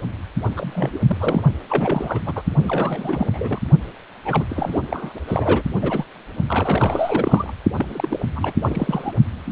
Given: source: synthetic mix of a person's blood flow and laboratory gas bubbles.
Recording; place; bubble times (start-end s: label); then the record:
Doppler ultrasound of blood flow; precordium
0.56-0.99 s: bubbles
1.07-1.17 s: bubbles
1.19-1.42 s: bubbles
1.69-2.21 s: bubbles
2.25-2.42 s: bubbles
2.62-3.59 s: bubbles
4.25-4.45 s: bubbles
4.49-4.83 s: bubbles
4.91-5.12 s: bubbles
5.28-5.63 s: bubbles
5.82-6.05 s: bubbles
6.48-7.54 s: bubbles
7.76-8.25 s: bubbles
8.35-8.53 s: bubbles
8.56-9.12 s: bubbles
9.45-9.52 s: bubbles
From the record:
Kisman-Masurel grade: 342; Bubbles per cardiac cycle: rolling drumbeat, 9 or more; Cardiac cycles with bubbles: 100%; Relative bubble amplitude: moderate (0.250 to 0.450); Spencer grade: 3 (all of the cardiac periods contain showers or single bubble signals, but not dominating or overriding the cardiac motion signals); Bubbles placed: only in the low amplitude regions of the cardiac cycle